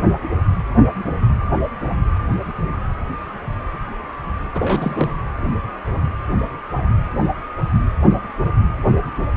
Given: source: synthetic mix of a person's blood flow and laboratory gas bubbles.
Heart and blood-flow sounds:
Doppler ultrasound of blood flow; precordium
4.54-5.13 s: bubbles
From the record:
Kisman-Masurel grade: 212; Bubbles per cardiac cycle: several, 3 to 8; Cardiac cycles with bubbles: 1 to 10%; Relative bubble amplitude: moderate (0.250 to 0.450); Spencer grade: 1 (occasional bubble signal discernible with the cardiac motion signal, with majority of cardiac periods free of bubbles); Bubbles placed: anywhere in the cardiac cycle

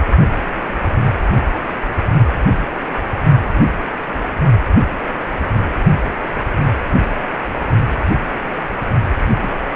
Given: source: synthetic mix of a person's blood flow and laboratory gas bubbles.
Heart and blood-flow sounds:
Doppler ultrasound of blood flow; precordium
9.43-9.52 s: bubbles
From the record:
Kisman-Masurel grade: 112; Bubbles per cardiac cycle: 1 to 2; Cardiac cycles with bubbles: 1 to 10%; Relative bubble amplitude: moderate (0.250 to 0.450); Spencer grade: 1 (occasional bubble signal discernible with the cardiac motion signal, with majority of cardiac periods free of bubbles); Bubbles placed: only in the low amplitude regions of the cardiac cycle

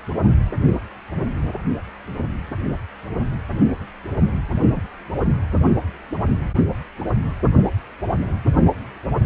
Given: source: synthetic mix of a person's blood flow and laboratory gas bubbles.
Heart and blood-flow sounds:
Doppler ultrasound of blood flow; precordium
4.75-4.82 s: bubbles
From the record:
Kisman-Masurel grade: 112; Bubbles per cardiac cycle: 1 to 2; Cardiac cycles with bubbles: 1 to 10%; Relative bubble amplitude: moderate (0.250 to 0.450); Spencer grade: 1 (occasional bubble signal discernible with the cardiac motion signal, with majority of cardiac periods free of bubbles); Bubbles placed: anywhere in the cardiac cycle

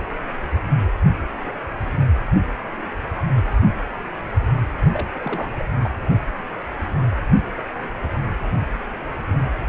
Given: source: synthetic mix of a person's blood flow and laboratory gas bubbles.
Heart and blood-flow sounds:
Doppler ultrasound of blood flow; precordium
4.93-5.06 s: bubbles
5.15-5.50 s: bubbles
5.59-5.63 s: bubbles
5.83-5.91 s: bubbles
From the record:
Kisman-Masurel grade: 211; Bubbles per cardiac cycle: several, 3 to 8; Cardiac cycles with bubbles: 1 to 10%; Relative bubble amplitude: barely perceptible (0.100 to 0.250); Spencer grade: 1 (occasional bubble signal discernible with the cardiac motion signal, with majority of cardiac periods free of bubbles); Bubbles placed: only in the low amplitude regions of the cardiac cycle

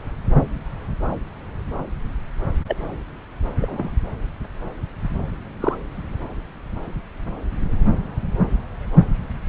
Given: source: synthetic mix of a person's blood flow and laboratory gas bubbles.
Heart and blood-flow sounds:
Doppler ultrasound of blood flow; subclavian vein
2.68-2.75 s: bubbles
3.59-3.91 s: bubbles
5.60-5.75 s: bubbles
From the record:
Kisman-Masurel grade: 122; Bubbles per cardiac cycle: 1 to 2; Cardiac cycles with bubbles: 10 to 50%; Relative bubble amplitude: moderate (0.250 to 0.450); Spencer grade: 2 (many but less than half of the cardiac periods contain bubble signals, singularly or in groups); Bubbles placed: anywhere in the cardiac cycle

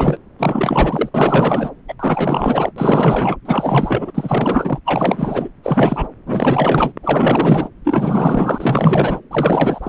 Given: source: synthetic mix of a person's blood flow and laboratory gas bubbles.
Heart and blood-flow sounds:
Doppler ultrasound of blood flow; subclavian vein
0.00-0.17 s: bubbles
0.39-1.09 s: bubbles
1.14-1.71 s: bubbles
1.88-1.94 s: bubbles
1.99-2.71 s: bubbles
2.76-3.36 s: bubbles
3.45-4.12 s: bubbles
4.15-4.79 s: bubbles
4.85-5.49 s: bubbles
5.63-6.08 s: bubbles
6.26-6.92 s: bubbles
7.03-7.69 s: bubbles
7.84-9.20 s: bubbles
9.30-9.89 s: bubbles
From the record:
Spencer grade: 4 (maximum detectable bubble signal sounding continuously throughout systole and diastole of every cardiac period, and overriding the amplitude of the normal cardiac signals); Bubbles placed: anywhere in the cardiac cycle

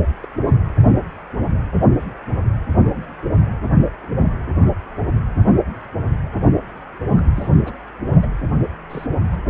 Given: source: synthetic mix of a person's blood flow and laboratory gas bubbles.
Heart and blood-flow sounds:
Doppler ultrasound of blood flow; precordium
0.23-0.26 s: bubbles
0.47-0.61 s: bubbles
7.17-7.21 s: bubbles
7.35-7.49 s: bubbles
7.64-7.74 s: bubbles
8.16-8.28 s: bubbles
8.89-9.06 s: bubbles
9.32-9.41 s: bubbles
From the record:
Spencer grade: 2 (many but less than half of the cardiac periods contain bubble signals, singularly or in groups); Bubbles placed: only in the low amplitude regions of the cardiac cycle

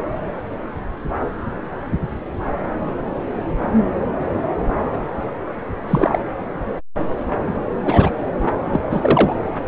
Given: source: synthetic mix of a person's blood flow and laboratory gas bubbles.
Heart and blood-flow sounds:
Doppler ultrasound of blood flow; subclavian vein
5.88-6.19 s: bubbles
7.85-8.10 s: bubbles
8.65-8.80 s: bubbles
8.91-9.36 s: bubbles
From the record:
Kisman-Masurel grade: 123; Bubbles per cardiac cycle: 1 to 2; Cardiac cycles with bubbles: 10 to 50%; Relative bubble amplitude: loud (0.450 to 0.775); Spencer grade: 2 (many but less than half of the cardiac periods contain bubble signals, singularly or in groups); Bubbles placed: anywhere in the cardiac cycle

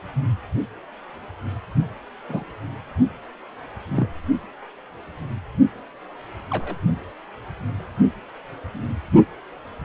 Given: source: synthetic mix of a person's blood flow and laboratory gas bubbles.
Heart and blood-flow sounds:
Doppler ultrasound of blood flow; precordium
2.29-2.44 s: bubbles
3.90-4.07 s: bubbles
6.50-6.75 s: bubbles
From the record:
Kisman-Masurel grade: 122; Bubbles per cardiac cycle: 1 to 2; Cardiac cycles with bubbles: 10 to 50%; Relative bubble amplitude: moderate (0.250 to 0.450); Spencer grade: 2 (many but less than half of the cardiac periods contain bubble signals, singularly or in groups); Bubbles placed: only in the low amplitude regions of the cardiac cycle

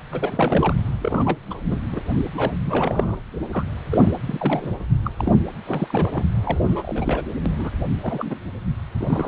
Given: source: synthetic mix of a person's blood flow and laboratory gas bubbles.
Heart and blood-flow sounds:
Doppler ultrasound of blood flow; precordium
0.11-0.74 s: bubbles
1.01-1.38 s: bubbles
1.50-1.61 s: bubbles
1.69-1.80 s: bubbles
1.92-2.00 s: bubbles
2.34-2.52 s: bubbles
2.65-3.17 s: bubbles
3.52-3.65 s: bubbles
3.91-4.21 s: bubbles
4.27-4.71 s: bubbles
5.04-5.11 s: bubbles
5.17-5.32 s: bubbles
5.66-6.25 s: bubbles
6.44-7.23 s: bubbles
7.46-7.71 s: bubbles
8.01-8.39 s: bubbles
8.97-9.28 s: bubbles
From the record:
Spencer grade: 3 (all of the cardiac periods contain showers or single bubble signals, but not dominating or overriding the cardiac motion signals); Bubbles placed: anywhere in the cardiac cycle

